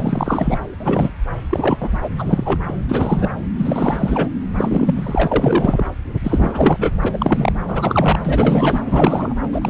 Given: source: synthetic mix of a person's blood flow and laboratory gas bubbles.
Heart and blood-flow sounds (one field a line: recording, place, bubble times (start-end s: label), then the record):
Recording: Doppler ultrasound of blood flow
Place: subclavian vein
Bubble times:
0.00-0.58 s: bubbles
0.80-1.10 s: bubbles
1.51-1.78 s: bubbles
1.80-1.98 s: bubbles
2.01-2.09 s: bubbles
2.18-2.59 s: bubbles
2.68-2.72 s: bubbles
2.88-3.30 s: bubbles
3.58-4.29 s: bubbles
4.57-5.84 s: bubbles
6.23-6.96 s: bubbles
7.04-7.52 s: bubbles
7.67-8.19 s: bubbles
8.24-8.80 s: bubbles
8.86-9.35 s: bubbles
9.53-9.70 s: bubbles
From the record:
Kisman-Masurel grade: 343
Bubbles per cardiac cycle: rolling drumbeat, 9 or more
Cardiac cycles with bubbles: 100%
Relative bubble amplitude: loud (0.450 to 0.775)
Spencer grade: 3 (all of the cardiac periods contain showers or single bubble signals, but not dominating or overriding the cardiac motion signals)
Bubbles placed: anywhere in the cardiac cycle